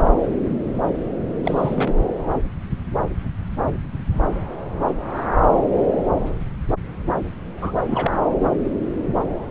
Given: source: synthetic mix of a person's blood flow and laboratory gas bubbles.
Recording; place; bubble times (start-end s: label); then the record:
Doppler ultrasound of blood flow; subclavian vein
1.44-1.94 s: bubbles
7.62-7.82 s: bubbles
7.85-8.11 s: bubbles
From the record:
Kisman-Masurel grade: 222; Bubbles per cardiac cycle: several, 3 to 8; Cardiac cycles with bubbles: 10 to 50%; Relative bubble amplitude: moderate (0.250 to 0.450); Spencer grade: 2 (many but less than half of the cardiac periods contain bubble signals, singularly or in groups); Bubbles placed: anywhere in the cardiac cycle